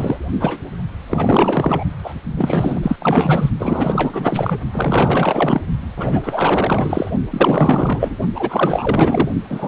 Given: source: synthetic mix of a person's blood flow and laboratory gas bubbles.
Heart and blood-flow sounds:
Doppler ultrasound of blood flow; precordium
0.00-0.18 s: bubbles
0.39-0.59 s: bubbles
1.09-1.84 s: bubbles
2.04-2.14 s: bubbles
2.23-3.50 s: bubbles
3.59-4.58 s: bubbles
4.71-5.61 s: bubbles
5.96-7.12 s: bubbles
7.30-8.18 s: bubbles
8.35-9.29 s: bubbles
9.49-9.68 s: bubbles
From the record:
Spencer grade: 4 (maximum detectable bubble signal sounding continuously throughout systole and diastole of every cardiac period, and overriding the amplitude of the normal cardiac signals); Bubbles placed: only in the low amplitude regions of the cardiac cycle

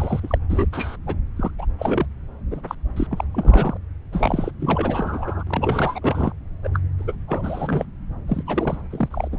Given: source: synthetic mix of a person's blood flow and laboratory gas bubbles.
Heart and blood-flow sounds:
Doppler ultrasound of blood flow; subclavian vein
0.00-0.20 s: bubbles
0.23-0.38 s: bubbles
0.49-0.66 s: bubbles
0.73-0.96 s: bubbles
1.07-1.16 s: bubbles
1.37-1.51 s: bubbles
1.58-1.66 s: bubbles
1.79-2.06 s: bubbles
2.51-2.60 s: bubbles
2.67-2.75 s: bubbles
2.96-3.07 s: bubbles
3.11-3.24 s: bubbles
3.34-3.77 s: bubbles
4.12-4.51 s: bubbles
4.59-5.44 s: bubbles
5.47-6.00 s: bubbles
6.02-6.33 s: bubbles
6.64-6.69 s: bubbles
6.74-6.79 s: bubbles
6.99-7.15 s: bubbles
7.28-7.85 s: bubbles
8.28-8.43 s: bubbles
8.46-8.80 s: bubbles
8.91-9.28 s: bubbles
9.32-9.38 s: bubbles
From the record:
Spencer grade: 3 (all of the cardiac periods contain showers or single bubble signals, but not dominating or overriding the cardiac motion signals); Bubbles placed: anywhere in the cardiac cycle

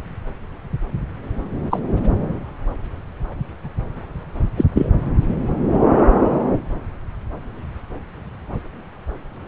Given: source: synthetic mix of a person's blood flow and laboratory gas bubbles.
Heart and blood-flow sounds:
Doppler ultrasound of blood flow; subclavian vein
1.70-1.79 s: bubbles
4.57-4.65 s: bubbles
4.74-4.90 s: bubbles
From the record:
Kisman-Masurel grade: 113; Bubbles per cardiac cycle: 1 to 2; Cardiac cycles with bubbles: 1 to 10%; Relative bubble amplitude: loud (0.450 to 0.775); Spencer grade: 1 (occasional bubble signal discernible with the cardiac motion signal, with majority of cardiac periods free of bubbles); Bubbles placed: anywhere in the cardiac cycle

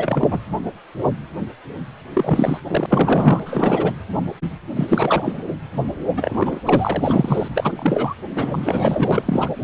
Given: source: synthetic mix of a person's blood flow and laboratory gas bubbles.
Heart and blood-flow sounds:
Doppler ultrasound of blood flow; precordium
0.00-0.40 s: bubbles
2.13-2.60 s: bubbles
2.67-3.40 s: bubbles
3.46-3.91 s: bubbles
4.76-5.34 s: bubbles
6.16-6.60 s: bubbles
6.65-7.48 s: bubbles
7.55-8.14 s: bubbles
8.35-9.49 s: bubbles
From the record:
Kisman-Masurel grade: 333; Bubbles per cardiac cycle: rolling drumbeat, 9 or more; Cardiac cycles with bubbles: 50 to 99%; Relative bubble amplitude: loud (0.450 to 0.775); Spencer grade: 3 (all of the cardiac periods contain showers or single bubble signals, but not dominating or overriding the cardiac motion signals); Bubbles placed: anywhere in the cardiac cycle

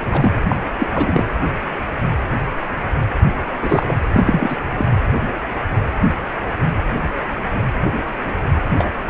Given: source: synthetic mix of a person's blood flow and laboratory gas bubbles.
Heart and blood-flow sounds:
Doppler ultrasound of blood flow; precordium
0.10-0.32 s: bubbles
0.49-0.56 s: bubbles
0.78-0.86 s: bubbles
0.92-1.26 s: bubbles
3.61-3.93 s: bubbles
4.13-4.57 s: bubbles
4.77-4.88 s: bubbles
8.78-8.91 s: bubbles
From the record:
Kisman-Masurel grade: 232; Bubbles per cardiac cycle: several, 3 to 8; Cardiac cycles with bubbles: 50 to 99%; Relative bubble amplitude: moderate (0.250 to 0.450); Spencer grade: 3 (all of the cardiac periods contain showers or single bubble signals, but not dominating or overriding the cardiac motion signals); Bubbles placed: anywhere in the cardiac cycle

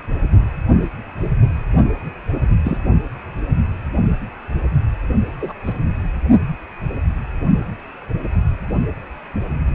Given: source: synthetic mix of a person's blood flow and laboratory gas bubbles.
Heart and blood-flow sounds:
Doppler ultrasound of blood flow; precordium
2.65-2.78 s: bubbles
5.41-5.52 s: bubbles
5.65-5.73 s: bubbles
From the record:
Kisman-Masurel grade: 122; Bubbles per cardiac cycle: 1 to 2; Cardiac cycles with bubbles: 10 to 50%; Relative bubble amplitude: moderate (0.250 to 0.450); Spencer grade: 2 (many but less than half of the cardiac periods contain bubble signals, singularly or in groups); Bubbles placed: only in the low amplitude regions of the cardiac cycle

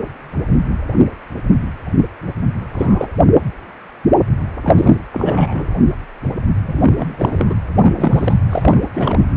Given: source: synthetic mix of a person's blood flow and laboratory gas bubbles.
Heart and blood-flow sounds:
Doppler ultrasound of blood flow; precordium
2.73-3.12 s: bubbles
4.62-4.96 s: bubbles
5.12-5.67 s: bubbles
6.67-7.54 s: bubbles
7.80-8.37 s: bubbles
8.50-8.81 s: bubbles
8.94-9.26 s: bubbles
From the record:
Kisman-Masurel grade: 232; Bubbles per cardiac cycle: several, 3 to 8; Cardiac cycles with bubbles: 50 to 99%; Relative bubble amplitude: moderate (0.250 to 0.450); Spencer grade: 3 (all of the cardiac periods contain showers or single bubble signals, but not dominating or overriding the cardiac motion signals); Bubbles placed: anywhere in the cardiac cycle

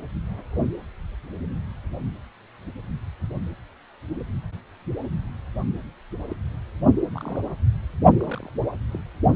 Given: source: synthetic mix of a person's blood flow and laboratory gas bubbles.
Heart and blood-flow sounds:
Doppler ultrasound of blood flow; precordium
6.29-6.36 s: bubbles
7.13-7.38 s: bubbles
8.21-8.49 s: bubbles
8.92-8.98 s: bubbles
From the record:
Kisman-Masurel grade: 121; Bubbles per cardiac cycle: 1 to 2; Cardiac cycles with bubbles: 10 to 50%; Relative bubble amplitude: barely perceptible (0.100 to 0.250); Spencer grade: 2 (many but less than half of the cardiac periods contain bubble signals, singularly or in groups); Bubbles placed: only in the low amplitude regions of the cardiac cycle

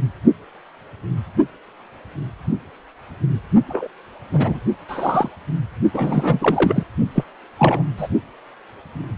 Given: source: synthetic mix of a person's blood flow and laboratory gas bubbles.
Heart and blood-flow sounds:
Doppler ultrasound of blood flow; precordium
3.68-3.87 s: bubbles
4.33-4.60 s: bubbles
4.88-5.29 s: bubbles
5.94-6.83 s: bubbles
7.15-7.24 s: bubbles
7.58-7.84 s: bubbles
7.97-8.08 s: bubbles
From the record:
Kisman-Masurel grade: 223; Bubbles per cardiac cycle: several, 3 to 8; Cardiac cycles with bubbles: 10 to 50%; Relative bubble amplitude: loud (0.450 to 0.775); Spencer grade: 2 (many but less than half of the cardiac periods contain bubble signals, singularly or in groups); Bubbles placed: only in the low amplitude regions of the cardiac cycle

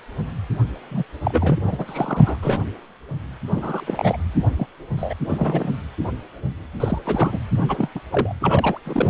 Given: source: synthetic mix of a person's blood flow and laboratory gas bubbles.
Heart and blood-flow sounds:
Doppler ultrasound of blood flow; precordium
0.91-1.04 s: bubbles
1.25-1.62 s: bubbles
1.65-2.38 s: bubbles
2.42-2.60 s: bubbles
3.47-4.17 s: bubbles
4.56-4.67 s: bubbles
4.96-5.13 s: bubbles
5.26-5.70 s: bubbles
6.80-6.99 s: bubbles
7.04-7.39 s: bubbles
7.57-7.64 s: bubbles
7.68-7.88 s: bubbles
7.95-8.00 s: bubbles
8.11-8.35 s: bubbles
8.40-8.79 s: bubbles
8.85-9.10 s: bubbles
From the record:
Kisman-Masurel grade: 232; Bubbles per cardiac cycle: several, 3 to 8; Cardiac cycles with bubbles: 50 to 99%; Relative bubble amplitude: moderate (0.250 to 0.450); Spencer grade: 3 (all of the cardiac periods contain showers or single bubble signals, but not dominating or overriding the cardiac motion signals); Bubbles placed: anywhere in the cardiac cycle

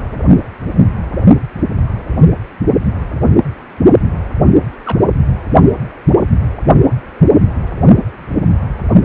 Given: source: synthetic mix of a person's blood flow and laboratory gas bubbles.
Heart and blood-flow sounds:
Doppler ultrasound of blood flow; precordium
4.85-4.97 s: bubbles
From the record:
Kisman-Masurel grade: 111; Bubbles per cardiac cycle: 1 to 2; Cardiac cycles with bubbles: 1 to 10%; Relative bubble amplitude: barely perceptible (0.100 to 0.250); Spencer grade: 1 (occasional bubble signal discernible with the cardiac motion signal, with majority of cardiac periods free of bubbles); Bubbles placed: only in the low amplitude regions of the cardiac cycle

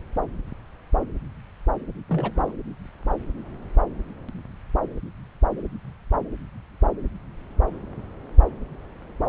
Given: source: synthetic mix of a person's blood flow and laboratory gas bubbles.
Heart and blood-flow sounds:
Doppler ultrasound of blood flow; subclavian vein
2.08-2.52 s: bubbles
From the record:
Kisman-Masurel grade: 211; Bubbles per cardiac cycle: several, 3 to 8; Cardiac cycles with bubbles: 1 to 10%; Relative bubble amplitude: barely perceptible (0.100 to 0.250); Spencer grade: 1 (occasional bubble signal discernible with the cardiac motion signal, with majority of cardiac periods free of bubbles); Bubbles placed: anywhere in the cardiac cycle

